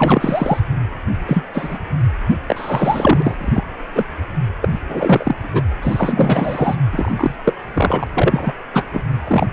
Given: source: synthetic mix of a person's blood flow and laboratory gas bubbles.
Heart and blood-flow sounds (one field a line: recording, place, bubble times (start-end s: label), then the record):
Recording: Doppler ultrasound of blood flow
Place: precordium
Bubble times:
0.00-0.60 s: bubbles
1.27-1.44 s: bubbles
1.54-1.79 s: bubbles
2.46-3.63 s: bubbles
3.95-4.04 s: bubbles
4.62-4.68 s: bubbles
4.71-4.79 s: bubbles
4.88-5.35 s: bubbles
5.42-5.63 s: bubbles
5.82-6.76 s: bubbles
6.92-7.37 s: bubbles
7.45-7.54 s: bubbles
7.74-8.07 s: bubbles
8.13-8.52 s: bubbles
8.72-8.83 s: bubbles
8.93-9.03 s: bubbles
9.27-9.47 s: bubbles
From the record:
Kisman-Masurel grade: 243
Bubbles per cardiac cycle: several, 3 to 8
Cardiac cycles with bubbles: 100%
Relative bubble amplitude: loud (0.450 to 0.775)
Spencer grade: 3 (all of the cardiac periods contain showers or single bubble signals, but not dominating or overriding the cardiac motion signals)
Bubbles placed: anywhere in the cardiac cycle